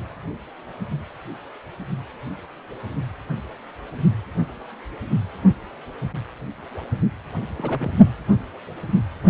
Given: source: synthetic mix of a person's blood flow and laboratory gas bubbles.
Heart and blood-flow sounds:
Doppler ultrasound of blood flow; precordium
7.59-7.92 s: bubbles
From the record:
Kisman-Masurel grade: 221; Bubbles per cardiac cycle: several, 3 to 8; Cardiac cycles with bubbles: 10 to 50%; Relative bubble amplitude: barely perceptible (0.100 to 0.250); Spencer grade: 2 (many but less than half of the cardiac periods contain bubble signals, singularly or in groups); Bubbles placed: only in the low amplitude regions of the cardiac cycle

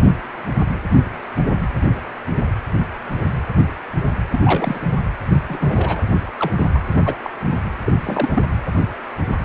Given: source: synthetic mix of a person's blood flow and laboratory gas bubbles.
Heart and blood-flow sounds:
Doppler ultrasound of blood flow; precordium
4.32-4.39 s: bubbles
4.43-4.80 s: bubbles
5.47-6.02 s: bubbles
6.39-6.51 s: bubbles
6.56-6.67 s: bubbles
6.74-6.79 s: bubbles
6.92-7.02 s: bubbles
7.05-7.16 s: bubbles
7.22-7.30 s: bubbles
7.46-7.55 s: bubbles
7.85-7.93 s: bubbles
8.04-8.29 s: bubbles
8.33-8.44 s: bubbles
From the record:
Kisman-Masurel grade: 232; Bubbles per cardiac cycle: several, 3 to 8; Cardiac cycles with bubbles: 50 to 99%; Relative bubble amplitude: moderate (0.250 to 0.450); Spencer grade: 3 (all of the cardiac periods contain showers or single bubble signals, but not dominating or overriding the cardiac motion signals); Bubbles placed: anywhere in the cardiac cycle

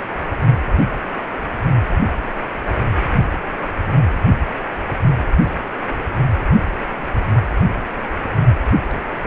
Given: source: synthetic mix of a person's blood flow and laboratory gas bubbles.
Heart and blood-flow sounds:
Doppler ultrasound of blood flow; precordium
no bubbles
From the record:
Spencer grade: 0 (complete lack of bubble signals)

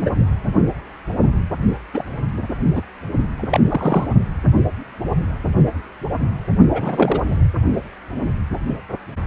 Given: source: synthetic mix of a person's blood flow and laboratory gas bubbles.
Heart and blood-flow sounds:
Doppler ultrasound of blood flow; precordium
0.01-0.10 s: bubbles
1.94-2.04 s: bubbles
2.73-2.82 s: bubbles
3.36-3.59 s: bubbles
3.69-4.07 s: bubbles
6.73-7.23 s: bubbles
7.31-7.38 s: bubbles
From the record:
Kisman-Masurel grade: 232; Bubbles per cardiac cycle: several, 3 to 8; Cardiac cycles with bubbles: 50 to 99%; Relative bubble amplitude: moderate (0.250 to 0.450); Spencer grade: 3 (all of the cardiac periods contain showers or single bubble signals, but not dominating or overriding the cardiac motion signals); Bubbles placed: only in the low amplitude regions of the cardiac cycle

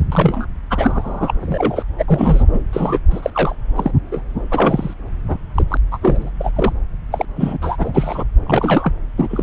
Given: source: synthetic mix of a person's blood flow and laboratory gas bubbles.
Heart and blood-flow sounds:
Doppler ultrasound of blood flow; subclavian vein
0.12-0.46 s: bubbles
0.70-1.34 s: bubbles
1.41-1.83 s: bubbles
1.98-2.04 s: bubbles
2.08-2.44 s: bubbles
2.53-2.60 s: bubbles
2.73-2.99 s: bubbles
3.10-3.30 s: bubbles
3.33-3.56 s: bubbles
3.76-3.92 s: bubbles
4.11-4.22 s: bubbles
4.50-4.94 s: bubbles
5.28-5.38 s: bubbles
5.54-5.64 s: bubbles
5.68-5.77 s: bubbles
5.91-5.98 s: bubbles
6.01-6.30 s: bubbles
6.40-6.51 s: bubbles
6.55-6.72 s: bubbles
7.11-7.25 s: bubbles
7.36-7.58 s: bubbles
7.61-8.24 s: bubbles
8.46-8.94 s: bubbles
9.17-9.43 s: bubbles
From the record:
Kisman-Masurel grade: 243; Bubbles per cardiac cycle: several, 3 to 8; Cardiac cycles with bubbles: 100%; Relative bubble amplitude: loud (0.450 to 0.775); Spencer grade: 3 (all of the cardiac periods contain showers or single bubble signals, but not dominating or overriding the cardiac motion signals); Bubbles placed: anywhere in the cardiac cycle

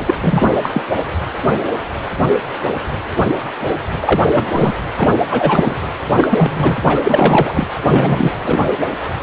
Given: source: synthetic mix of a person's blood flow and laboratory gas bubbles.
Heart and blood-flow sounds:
Doppler ultrasound of blood flow; precordium
0.06-0.15 s: bubbles
0.21-0.51 s: bubbles
0.61-0.82 s: bubbles
4.02-4.74 s: bubbles
4.97-5.10 s: bubbles
5.30-5.76 s: bubbles
6.17-6.78 s: bubbles
6.83-7.67 s: bubbles
7.88-8.31 s: bubbles
8.45-8.60 s: bubbles
From the record:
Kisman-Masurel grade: 233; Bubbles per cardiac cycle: several, 3 to 8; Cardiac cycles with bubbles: 50 to 99%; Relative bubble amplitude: loud (0.450 to 0.775); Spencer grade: 3 (all of the cardiac periods contain showers or single bubble signals, but not dominating or overriding the cardiac motion signals); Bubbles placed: anywhere in the cardiac cycle

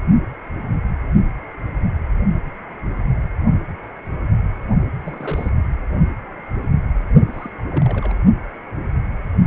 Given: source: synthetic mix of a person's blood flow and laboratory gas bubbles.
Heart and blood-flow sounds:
Doppler ultrasound of blood flow; precordium
5.04-5.50 s: bubbles
7.33-7.50 s: bubbles
7.61-8.15 s: bubbles
From the record:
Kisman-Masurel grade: 221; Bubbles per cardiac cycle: several, 3 to 8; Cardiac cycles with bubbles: 10 to 50%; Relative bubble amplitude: barely perceptible (0.100 to 0.250); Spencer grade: 2 (many but less than half of the cardiac periods contain bubble signals, singularly or in groups); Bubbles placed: only in the low amplitude regions of the cardiac cycle

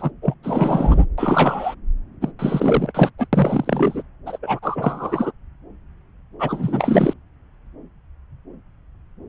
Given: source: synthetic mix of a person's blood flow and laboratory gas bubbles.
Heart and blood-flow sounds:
Doppler ultrasound of blood flow; subclavian vein
0.00-0.11 s: bubbles
0.22-0.34 s: bubbles
0.43-1.06 s: bubbles
1.18-1.75 s: bubbles
2.21-2.31 s: bubbles
2.39-3.10 s: bubbles
3.18-3.27 s: bubbles
3.33-4.03 s: bubbles
4.26-4.38 s: bubbles
4.42-4.59 s: bubbles
4.62-5.32 s: bubbles
6.39-7.13 s: bubbles
From the record:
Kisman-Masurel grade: 333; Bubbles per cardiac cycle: rolling drumbeat, 9 or more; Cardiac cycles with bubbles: 50 to 99%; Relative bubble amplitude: loud (0.450 to 0.775); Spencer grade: 3 (all of the cardiac periods contain showers or single bubble signals, but not dominating or overriding the cardiac motion signals); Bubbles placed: anywhere in the cardiac cycle

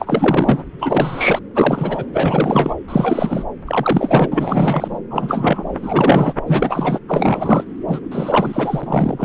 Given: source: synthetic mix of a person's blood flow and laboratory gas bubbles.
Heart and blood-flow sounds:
Doppler ultrasound of blood flow; subclavian vein
0.00-0.64 s: bubbles
0.79-1.40 s: bubbles
1.55-2.04 s: bubbles
2.12-2.75 s: bubbles
2.88-3.45 s: bubbles
3.66-4.28 s: bubbles
4.31-4.99 s: bubbles
5.10-5.63 s: bubbles
5.69-6.33 s: bubbles
6.46-6.99 s: bubbles
7.08-7.63 s: bubbles
7.87-7.99 s: bubbles
8.12-9.25 s: bubbles
From the record:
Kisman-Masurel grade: 343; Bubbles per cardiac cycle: rolling drumbeat, 9 or more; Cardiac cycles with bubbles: 100%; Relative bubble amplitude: loud (0.450 to 0.775); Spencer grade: 3 (all of the cardiac periods contain showers or single bubble signals, but not dominating or overriding the cardiac motion signals); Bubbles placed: anywhere in the cardiac cycle

